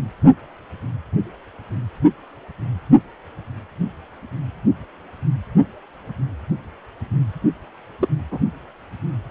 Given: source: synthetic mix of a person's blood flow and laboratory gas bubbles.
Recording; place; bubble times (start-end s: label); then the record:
Doppler ultrasound of blood flow; precordium
8.00-8.08 s: bubbles
8.31-8.39 s: bubbles
From the record:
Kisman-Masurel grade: 112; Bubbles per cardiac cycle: 1 to 2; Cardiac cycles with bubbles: 1 to 10%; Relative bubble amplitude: moderate (0.250 to 0.450); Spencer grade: 1 (occasional bubble signal discernible with the cardiac motion signal, with majority of cardiac periods free of bubbles); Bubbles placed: only in the low amplitude regions of the cardiac cycle